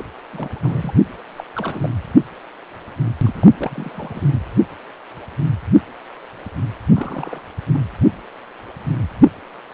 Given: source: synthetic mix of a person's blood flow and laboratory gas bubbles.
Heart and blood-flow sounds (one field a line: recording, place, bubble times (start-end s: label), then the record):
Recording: Doppler ultrasound of blood flow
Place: precordium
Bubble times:
0.00-0.05 s: bubbles
0.33-0.92 s: bubbles
1.36-1.44 s: bubbles
1.56-1.90 s: bubbles
3.23-3.47 s: bubbles
3.57-4.21 s: bubbles
6.95-7.41 s: bubbles
7.73-7.81 s: bubbles
From the record:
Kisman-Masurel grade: 221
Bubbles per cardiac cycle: several, 3 to 8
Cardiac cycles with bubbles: 10 to 50%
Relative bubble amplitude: barely perceptible (0.100 to 0.250)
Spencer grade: 2 (many but less than half of the cardiac periods contain bubble signals, singularly or in groups)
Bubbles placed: anywhere in the cardiac cycle